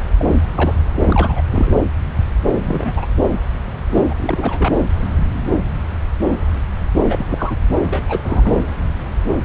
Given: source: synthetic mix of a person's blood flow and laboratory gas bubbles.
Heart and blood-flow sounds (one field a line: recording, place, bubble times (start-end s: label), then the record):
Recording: Doppler ultrasound of blood flow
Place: subclavian vein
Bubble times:
0.18-0.35 s: bubbles
0.55-0.73 s: bubbles
1.00-1.42 s: bubbles
1.51-1.71 s: bubbles
2.50-3.06 s: bubbles
3.90-4.04 s: bubbles
4.08-4.13 s: bubbles
4.17-4.73 s: bubbles
7.09-7.26 s: bubbles
7.29-7.56 s: bubbles
7.89-8.04 s: bubbles
8.08-8.61 s: bubbles
From the record:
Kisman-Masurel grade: 222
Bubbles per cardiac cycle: several, 3 to 8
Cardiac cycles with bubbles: 10 to 50%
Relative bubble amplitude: moderate (0.250 to 0.450)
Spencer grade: 2 (many but less than half of the cardiac periods contain bubble signals, singularly or in groups)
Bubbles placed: anywhere in the cardiac cycle